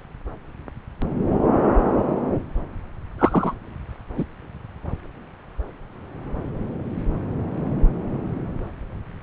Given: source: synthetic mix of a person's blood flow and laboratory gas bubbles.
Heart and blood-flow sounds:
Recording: Doppler ultrasound of blood flow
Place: subclavian vein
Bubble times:
3.18-3.54 s: bubbles
4.17-4.24 s: bubbles
From the record:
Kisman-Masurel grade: 123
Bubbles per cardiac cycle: 1 to 2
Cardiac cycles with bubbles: 10 to 50%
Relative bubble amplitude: loud (0.450 to 0.775)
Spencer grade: 2 (many but less than half of the cardiac periods contain bubble signals, singularly or in groups)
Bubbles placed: anywhere in the cardiac cycle

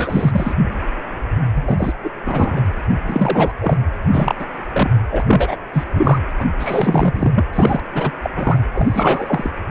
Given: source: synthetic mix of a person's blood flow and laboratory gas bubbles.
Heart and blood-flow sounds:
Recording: Doppler ultrasound of blood flow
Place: precordium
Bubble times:
0.00-0.54 s: bubbles
1.54-1.93 s: bubbles
2.03-2.09 s: bubbles
2.25-2.65 s: bubbles
3.07-3.53 s: bubbles
3.60-3.78 s: bubbles
4.13-4.35 s: bubbles
4.38-4.46 s: bubbles
4.72-4.91 s: bubbles
5.12-5.23 s: bubbles
5.26-5.56 s: bubbles
5.73-5.84 s: bubbles
5.94-6.19 s: bubbles
6.38-6.46 s: bubbles
6.59-7.31 s: bubbles
7.35-7.44 s: bubbles
7.52-7.80 s: bubbles
7.94-8.12 s: bubbles
8.23-8.30 s: bubbles
8.36-8.59 s: bubbles
8.74-9.51 s: bubbles
From the record:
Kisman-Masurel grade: 333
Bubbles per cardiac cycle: rolling drumbeat, 9 or more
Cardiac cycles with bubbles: 50 to 99%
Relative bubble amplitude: loud (0.450 to 0.775)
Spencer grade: 3 (all of the cardiac periods contain showers or single bubble signals, but not dominating or overriding the cardiac motion signals)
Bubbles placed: anywhere in the cardiac cycle

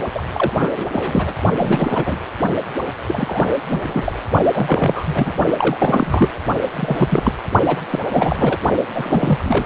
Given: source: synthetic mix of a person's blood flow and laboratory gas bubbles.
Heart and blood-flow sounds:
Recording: Doppler ultrasound of blood flow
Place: precordium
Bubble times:
0.14-0.23 s: bubbles
0.32-0.54 s: bubbles
0.56-0.71 s: bubbles
0.76-0.85 s: bubbles
0.93-1.34 s: bubbles
1.55-2.18 s: bubbles
3.06-3.52 s: bubbles
3.67-4.12 s: bubbles
4.52-5.33 s: bubbles
5.58-6.29 s: bubbles
6.73-7.33 s: bubbles
7.66-7.81 s: bubbles
7.90-7.99 s: bubbles
8.06-8.57 s: bubbles
8.93-9.66 s: bubbles
From the record:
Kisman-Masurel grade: 343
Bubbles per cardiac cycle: rolling drumbeat, 9 or more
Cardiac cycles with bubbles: 100%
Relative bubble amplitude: loud (0.450 to 0.775)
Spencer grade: 3 (all of the cardiac periods contain showers or single bubble signals, but not dominating or overriding the cardiac motion signals)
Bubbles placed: only in the low amplitude regions of the cardiac cycle

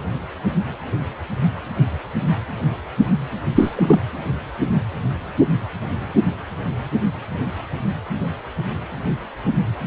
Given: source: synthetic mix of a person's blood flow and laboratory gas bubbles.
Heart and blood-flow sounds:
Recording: Doppler ultrasound of blood flow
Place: precordium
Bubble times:
3.56-3.72 s: bubbles
3.74-4.00 s: bubbles
From the record:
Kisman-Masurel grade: 213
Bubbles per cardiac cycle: several, 3 to 8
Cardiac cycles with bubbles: 1 to 10%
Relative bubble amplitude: loud (0.450 to 0.775)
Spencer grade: 1 (occasional bubble signal discernible with the cardiac motion signal, with majority of cardiac periods free of bubbles)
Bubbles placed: anywhere in the cardiac cycle

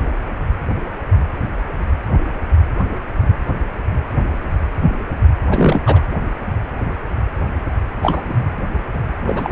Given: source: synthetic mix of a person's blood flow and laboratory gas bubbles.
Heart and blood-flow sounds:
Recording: Doppler ultrasound of blood flow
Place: precordium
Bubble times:
5.48-5.82 s: bubbles
5.86-6.02 s: bubbles
8.02-8.43 s: bubbles
9.26-9.52 s: bubbles
From the record:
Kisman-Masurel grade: 222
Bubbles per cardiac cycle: several, 3 to 8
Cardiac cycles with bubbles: 10 to 50%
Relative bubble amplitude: moderate (0.250 to 0.450)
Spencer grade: 2 (many but less than half of the cardiac periods contain bubble signals, singularly or in groups)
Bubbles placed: anywhere in the cardiac cycle

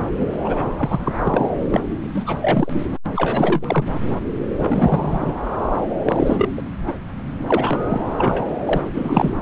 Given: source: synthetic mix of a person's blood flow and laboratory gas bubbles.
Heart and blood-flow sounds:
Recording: Doppler ultrasound of blood flow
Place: subclavian vein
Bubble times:
0.19-0.27 s: bubbles
0.44-0.70 s: bubbles
0.78-1.15 s: bubbles
1.23-1.49 s: bubbles
1.70-1.81 s: bubbles
2.03-2.09 s: bubbles
2.14-2.38 s: bubbles
2.42-2.73 s: bubbles
3.15-3.84 s: bubbles
3.92-4.00 s: bubbles
4.59-5.33 s: bubbles
6.05-6.50 s: bubbles
6.56-6.62 s: bubbles
6.87-6.92 s: bubbles
7.46-8.04 s: bubbles
8.17-8.44 s: bubbles
8.66-8.83 s: bubbles
8.94-9.34 s: bubbles
From the record:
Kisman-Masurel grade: 343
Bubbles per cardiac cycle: rolling drumbeat, 9 or more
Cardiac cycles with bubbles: 100%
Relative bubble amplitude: loud (0.450 to 0.775)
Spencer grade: 3 (all of the cardiac periods contain showers or single bubble signals, but not dominating or overriding the cardiac motion signals)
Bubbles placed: anywhere in the cardiac cycle

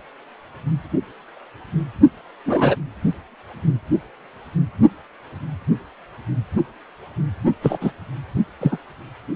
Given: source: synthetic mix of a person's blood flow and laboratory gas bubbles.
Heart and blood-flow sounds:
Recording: Doppler ultrasound of blood flow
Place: precordium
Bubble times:
2.46-2.76 s: bubbles
7.61-7.77 s: bubbles
7.80-7.92 s: bubbles
8.61-8.78 s: bubbles
From the record:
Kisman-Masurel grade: 123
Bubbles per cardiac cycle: 1 to 2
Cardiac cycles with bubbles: 10 to 50%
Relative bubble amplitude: loud (0.450 to 0.775)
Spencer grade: 2 (many but less than half of the cardiac periods contain bubble signals, singularly or in groups)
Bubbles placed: only in the low amplitude regions of the cardiac cycle

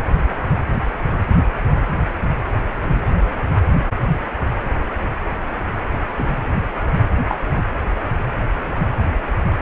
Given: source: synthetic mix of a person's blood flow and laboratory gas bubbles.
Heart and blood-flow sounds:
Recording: Doppler ultrasound of blood flow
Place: precordium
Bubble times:
6.17-6.38 s: bubbles
7.27-7.37 s: bubbles
7.54-7.62 s: bubbles
From the record:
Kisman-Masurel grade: 112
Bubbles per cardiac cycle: 1 to 2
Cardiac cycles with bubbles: 1 to 10%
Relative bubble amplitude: moderate (0.250 to 0.450)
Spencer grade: 1 (occasional bubble signal discernible with the cardiac motion signal, with majority of cardiac periods free of bubbles)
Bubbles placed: anywhere in the cardiac cycle

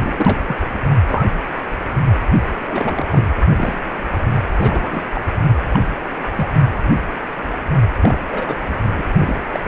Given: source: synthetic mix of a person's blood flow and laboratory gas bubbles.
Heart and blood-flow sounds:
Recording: Doppler ultrasound of blood flow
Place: precordium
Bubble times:
0.00-0.39 s: bubbles
0.48-0.57 s: bubbles
1.06-1.24 s: bubbles
2.69-3.08 s: bubbles
3.11-3.25 s: bubbles
3.56-3.78 s: bubbles
4.57-5.02 s: bubbles
5.15-5.22 s: bubbles
5.69-5.80 s: bubbles
6.35-6.54 s: bubbles
8.00-8.18 s: bubbles
8.31-8.59 s: bubbles
8.67-8.76 s: bubbles
8.98-9.04 s: bubbles
9.18-9.37 s: bubbles
9.52-9.60 s: bubbles
From the record:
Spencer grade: 3 (all of the cardiac periods contain showers or single bubble signals, but not dominating or overriding the cardiac motion signals)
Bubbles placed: anywhere in the cardiac cycle

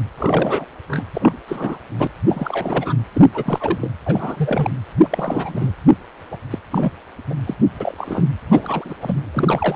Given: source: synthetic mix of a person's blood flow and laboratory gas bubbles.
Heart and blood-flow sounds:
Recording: Doppler ultrasound of blood flow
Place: precordium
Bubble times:
0.18-0.65 s: bubbles
0.87-1.04 s: bubbles
1.15-1.37 s: bubbles
1.48-1.79 s: bubbles
1.98-2.07 s: bubbles
2.27-2.94 s: bubbles
3.14-3.21 s: bubbles
3.33-3.78 s: bubbles
3.81-3.91 s: bubbles
4.05-4.71 s: bubbles
5.02-5.71 s: bubbles
6.30-6.38 s: bubbles
6.50-6.59 s: bubbles
6.71-6.92 s: bubbles
7.29-7.34 s: bubbles
7.46-7.54 s: bubbles
7.80-7.95 s: bubbles
7.97-8.29 s: bubbles
8.49-8.95 s: bubbles
9.02-9.23 s: bubbles
9.33-9.76 s: bubbles
From the record:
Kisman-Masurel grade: 342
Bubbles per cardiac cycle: rolling drumbeat, 9 or more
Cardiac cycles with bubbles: 100%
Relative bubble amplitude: moderate (0.250 to 0.450)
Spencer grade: 3 (all of the cardiac periods contain showers or single bubble signals, but not dominating or overriding the cardiac motion signals)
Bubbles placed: anywhere in the cardiac cycle

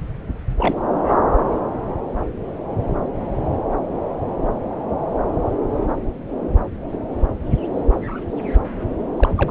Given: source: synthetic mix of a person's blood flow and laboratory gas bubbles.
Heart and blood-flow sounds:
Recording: Doppler ultrasound of blood flow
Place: subclavian vein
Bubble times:
0.58-0.76 s: bubbles
0.92-1.13 s: bubbles
9.17-9.29 s: bubbles
9.38-9.51 s: bubbles
From the record:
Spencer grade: 2 (many but less than half of the cardiac periods contain bubble signals, singularly or in groups)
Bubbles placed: anywhere in the cardiac cycle

